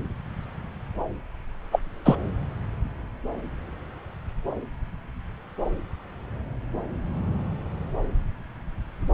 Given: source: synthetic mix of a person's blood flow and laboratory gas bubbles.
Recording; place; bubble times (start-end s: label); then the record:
Doppler ultrasound of blood flow; subclavian vein
1.72-1.80 s: bubbles
2.05-2.16 s: bubbles
From the record:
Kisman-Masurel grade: 123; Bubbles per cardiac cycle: 1 to 2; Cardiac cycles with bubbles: 10 to 50%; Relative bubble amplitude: loud (0.450 to 0.775); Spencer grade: 2 (many but less than half of the cardiac periods contain bubble signals, singularly or in groups); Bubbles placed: anywhere in the cardiac cycle